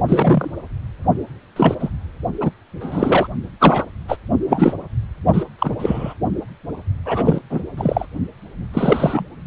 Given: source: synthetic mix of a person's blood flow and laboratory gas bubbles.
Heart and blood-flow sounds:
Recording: Doppler ultrasound of blood flow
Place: precordium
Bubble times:
0.07-0.51 s: bubbles
1.56-1.75 s: bubbles
1.80-1.90 s: bubbles
2.41-2.50 s: bubbles
2.81-3.28 s: bubbles
3.60-3.86 s: bubbles
4.08-4.17 s: bubbles
4.48-4.75 s: bubbles
5.33-5.44 s: bubbles
5.58-5.75 s: bubbles
5.79-6.14 s: bubbles
7.04-7.39 s: bubbles
7.50-7.61 s: bubbles
7.77-8.05 s: bubbles
8.73-9.24 s: bubbles
From the record:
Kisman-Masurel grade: 243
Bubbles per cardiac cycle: several, 3 to 8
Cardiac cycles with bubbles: 100%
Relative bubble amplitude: loud (0.450 to 0.775)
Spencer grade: 3 (all of the cardiac periods contain showers or single bubble signals, but not dominating or overriding the cardiac motion signals)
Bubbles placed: only in the low amplitude regions of the cardiac cycle

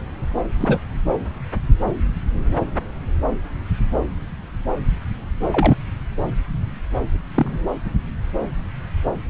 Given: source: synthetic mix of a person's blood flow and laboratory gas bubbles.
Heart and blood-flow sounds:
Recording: Doppler ultrasound of blood flow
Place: subclavian vein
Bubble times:
0.60-0.80 s: bubbles
5.50-5.77 s: bubbles
7.34-7.61 s: bubbles
From the record:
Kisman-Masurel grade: 122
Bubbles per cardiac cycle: 1 to 2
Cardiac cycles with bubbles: 10 to 50%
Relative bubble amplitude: moderate (0.250 to 0.450)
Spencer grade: 2 (many but less than half of the cardiac periods contain bubble signals, singularly or in groups)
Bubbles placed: anywhere in the cardiac cycle

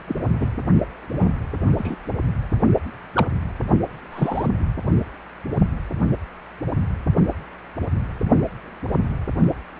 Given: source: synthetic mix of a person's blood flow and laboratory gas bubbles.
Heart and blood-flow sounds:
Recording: Doppler ultrasound of blood flow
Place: precordium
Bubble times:
0.07-0.16 s: bubbles
0.40-0.58 s: bubbles
1.10-1.33 s: bubbles
1.77-1.95 s: bubbles
3.13-3.27 s: bubbles
4.12-4.46 s: bubbles
From the record:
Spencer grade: 2 (many but less than half of the cardiac periods contain bubble signals, singularly or in groups)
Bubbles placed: only in the low amplitude regions of the cardiac cycle

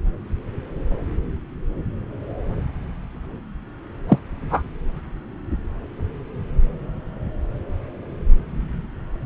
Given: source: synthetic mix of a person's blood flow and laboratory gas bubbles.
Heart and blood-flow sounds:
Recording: Doppler ultrasound of blood flow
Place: subclavian vein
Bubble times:
4.08-4.19 s: bubbles
4.50-4.63 s: bubbles
From the record:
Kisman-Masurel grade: 113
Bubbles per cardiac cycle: 1 to 2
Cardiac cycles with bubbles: 1 to 10%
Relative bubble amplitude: loud (0.450 to 0.775)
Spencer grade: 1 (occasional bubble signal discernible with the cardiac motion signal, with majority of cardiac periods free of bubbles)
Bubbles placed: anywhere in the cardiac cycle

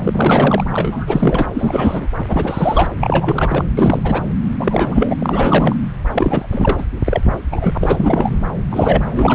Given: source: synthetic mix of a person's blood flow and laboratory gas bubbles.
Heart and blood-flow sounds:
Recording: Doppler ultrasound of blood flow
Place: subclavian vein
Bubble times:
0.03-0.64 s: bubbles
0.72-1.46 s: bubbles
1.54-2.07 s: bubbles
2.19-2.24 s: bubbles
2.28-2.90 s: bubbles
2.99-3.64 s: bubbles
3.77-4.23 s: bubbles
4.59-5.16 s: bubbles
5.19-5.75 s: bubbles
6.12-6.47 s: bubbles
6.52-6.85 s: bubbles
7.05-7.22 s: bubbles
7.50-7.78 s: bubbles
7.81-8.38 s: bubbles
8.70-9.03 s: bubbles
9.16-9.35 s: bubbles
From the record:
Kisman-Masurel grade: 343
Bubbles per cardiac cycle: rolling drumbeat, 9 or more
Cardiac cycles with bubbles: 100%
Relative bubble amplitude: loud (0.450 to 0.775)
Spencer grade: 3 (all of the cardiac periods contain showers or single bubble signals, but not dominating or overriding the cardiac motion signals)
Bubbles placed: anywhere in the cardiac cycle

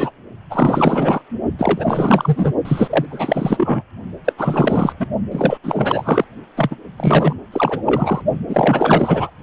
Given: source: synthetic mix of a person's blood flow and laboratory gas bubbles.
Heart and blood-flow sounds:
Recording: Doppler ultrasound of blood flow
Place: precordium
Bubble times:
0.00-0.11 s: bubbles
0.50-1.21 s: bubbles
1.58-2.53 s: bubbles
2.65-3.06 s: bubbles
3.09-3.82 s: bubbles
4.25-4.33 s: bubbles
4.38-4.93 s: bubbles
5.00-5.07 s: bubbles
5.31-5.58 s: bubbles
5.63-6.24 s: bubbles
6.56-6.76 s: bubbles
6.97-7.35 s: bubbles
7.52-8.21 s: bubbles
8.48-9.30 s: bubbles
From the record:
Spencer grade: 4 (maximum detectable bubble signal sounding continuously throughout systole and diastole of every cardiac period, and overriding the amplitude of the normal cardiac signals)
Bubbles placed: only in the low amplitude regions of the cardiac cycle

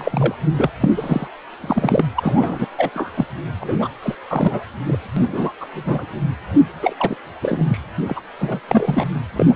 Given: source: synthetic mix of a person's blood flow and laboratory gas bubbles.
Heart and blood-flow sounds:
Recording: Doppler ultrasound of blood flow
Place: precordium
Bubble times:
0.00-0.35 s: bubbles
0.53-0.71 s: bubbles
0.81-0.90 s: bubbles
0.96-1.27 s: bubbles
1.58-2.05 s: bubbles
2.15-2.67 s: bubbles
2.77-2.90 s: bubbles
2.94-3.10 s: bubbles
3.15-3.26 s: bubbles
3.60-3.88 s: bubbles
4.02-4.15 s: bubbles
4.28-4.63 s: bubbles
4.85-4.98 s: bubbles
5.16-5.52 s: bubbles
5.60-5.67 s: bubbles
5.73-6.06 s: bubbles
6.81-7.16 s: bubbles
7.42-7.80 s: bubbles
8.07-8.21 s: bubbles
8.38-8.60 s: bubbles
8.68-9.05 s: bubbles
9.36-9.56 s: bubbles
From the record:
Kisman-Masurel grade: 333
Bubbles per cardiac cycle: rolling drumbeat, 9 or more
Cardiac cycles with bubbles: 50 to 99%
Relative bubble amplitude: loud (0.450 to 0.775)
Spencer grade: 3 (all of the cardiac periods contain showers or single bubble signals, but not dominating or overriding the cardiac motion signals)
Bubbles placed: anywhere in the cardiac cycle

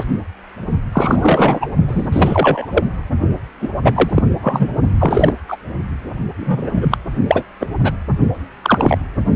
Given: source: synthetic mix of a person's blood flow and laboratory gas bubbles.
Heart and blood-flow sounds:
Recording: Doppler ultrasound of blood flow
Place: precordium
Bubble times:
0.00-0.05 s: bubbles
0.92-1.71 s: bubbles
1.88-2.09 s: bubbles
2.12-2.67 s: bubbles
2.73-2.86 s: bubbles
3.60-3.69 s: bubbles
3.84-4.22 s: bubbles
4.42-4.70 s: bubbles
5.00-5.34 s: bubbles
5.48-5.56 s: bubbles
6.35-6.97 s: bubbles
7.27-7.43 s: bubbles
7.60-7.67 s: bubbles
7.83-7.92 s: bubbles
8.62-8.98 s: bubbles
From the record:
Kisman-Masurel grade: 243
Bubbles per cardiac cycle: several, 3 to 8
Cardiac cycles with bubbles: 100%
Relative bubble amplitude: loud (0.450 to 0.775)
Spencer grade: 3 (all of the cardiac periods contain showers or single bubble signals, but not dominating or overriding the cardiac motion signals)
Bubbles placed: only in the low amplitude regions of the cardiac cycle

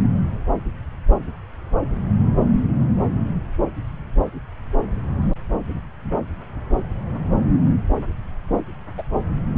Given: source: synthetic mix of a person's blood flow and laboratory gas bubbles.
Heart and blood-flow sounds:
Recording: Doppler ultrasound of blood flow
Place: subclavian vein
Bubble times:
8.97-9.03 s: bubbles
From the record:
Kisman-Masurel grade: 112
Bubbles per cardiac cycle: 1 to 2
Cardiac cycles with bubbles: 1 to 10%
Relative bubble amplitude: moderate (0.250 to 0.450)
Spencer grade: 1 (occasional bubble signal discernible with the cardiac motion signal, with majority of cardiac periods free of bubbles)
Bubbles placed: anywhere in the cardiac cycle

